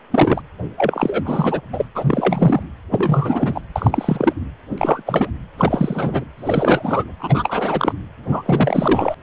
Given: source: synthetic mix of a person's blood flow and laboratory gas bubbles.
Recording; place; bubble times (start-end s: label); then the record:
Doppler ultrasound of blood flow; precordium
0.11-0.41 s: bubbles
0.77-1.60 s: bubbles
1.72-1.85 s: bubbles
1.95-2.63 s: bubbles
2.91-3.60 s: bubbles
3.75-4.33 s: bubbles
4.78-5.02 s: bubbles
5.06-5.30 s: bubbles
5.58-6.25 s: bubbles
6.37-7.04 s: bubbles
7.19-7.94 s: bubbles
8.29-9.14 s: bubbles
From the record:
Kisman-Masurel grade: 343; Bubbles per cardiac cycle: rolling drumbeat, 9 or more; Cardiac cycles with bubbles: 100%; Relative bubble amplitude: loud (0.450 to 0.775); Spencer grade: 3 (all of the cardiac periods contain showers or single bubble signals, but not dominating or overriding the cardiac motion signals); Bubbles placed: anywhere in the cardiac cycle